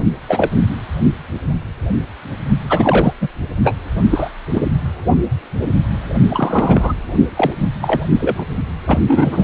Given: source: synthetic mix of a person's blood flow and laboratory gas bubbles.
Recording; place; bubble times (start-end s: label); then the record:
Doppler ultrasound of blood flow; precordium
0.28-0.51 s: bubbles
2.70-3.13 s: bubbles
3.21-3.28 s: bubbles
3.64-3.76 s: bubbles
4.10-4.29 s: bubbles
4.54-4.69 s: bubbles
6.30-6.93 s: bubbles
7.36-7.52 s: bubbles
7.80-8.04 s: bubbles
8.20-8.46 s: bubbles
8.87-9.01 s: bubbles
9.07-9.44 s: bubbles
From the record:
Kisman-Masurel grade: 233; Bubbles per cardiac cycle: several, 3 to 8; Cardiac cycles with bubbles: 50 to 99%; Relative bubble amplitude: loud (0.450 to 0.775); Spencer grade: 3 (all of the cardiac periods contain showers or single bubble signals, but not dominating or overriding the cardiac motion signals); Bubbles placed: only in the low amplitude regions of the cardiac cycle